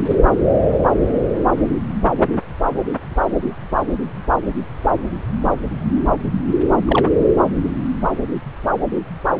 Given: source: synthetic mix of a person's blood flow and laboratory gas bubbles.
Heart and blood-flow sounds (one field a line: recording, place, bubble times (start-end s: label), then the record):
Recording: Doppler ultrasound of blood flow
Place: subclavian vein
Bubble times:
6.85-7.08 s: bubbles
From the record:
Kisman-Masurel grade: 112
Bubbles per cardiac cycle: 1 to 2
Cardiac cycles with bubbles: 1 to 10%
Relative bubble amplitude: moderate (0.250 to 0.450)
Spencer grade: 1 (occasional bubble signal discernible with the cardiac motion signal, with majority of cardiac periods free of bubbles)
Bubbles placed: anywhere in the cardiac cycle